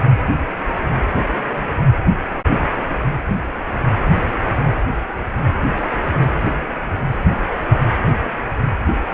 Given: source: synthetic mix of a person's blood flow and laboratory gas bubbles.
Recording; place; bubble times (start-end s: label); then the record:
Doppler ultrasound of blood flow; precordium
no bubbles
From the record:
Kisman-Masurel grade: 000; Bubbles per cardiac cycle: 0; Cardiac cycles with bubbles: 0%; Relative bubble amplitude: no bubbles discernible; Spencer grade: 0 (complete lack of bubble signals)